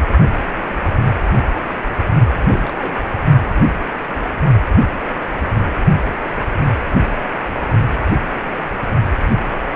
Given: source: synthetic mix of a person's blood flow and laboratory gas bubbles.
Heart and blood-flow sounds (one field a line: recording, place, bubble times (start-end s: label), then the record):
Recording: Doppler ultrasound of blood flow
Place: precordium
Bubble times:
2.40-2.73 s: bubbles
2.79-2.95 s: bubbles
8.02-8.12 s: bubbles
From the record:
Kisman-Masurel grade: 121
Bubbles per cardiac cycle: 1 to 2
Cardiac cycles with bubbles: 10 to 50%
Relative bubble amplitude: barely perceptible (0.100 to 0.250)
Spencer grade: 2 (many but less than half of the cardiac periods contain bubble signals, singularly or in groups)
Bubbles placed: only in the low amplitude regions of the cardiac cycle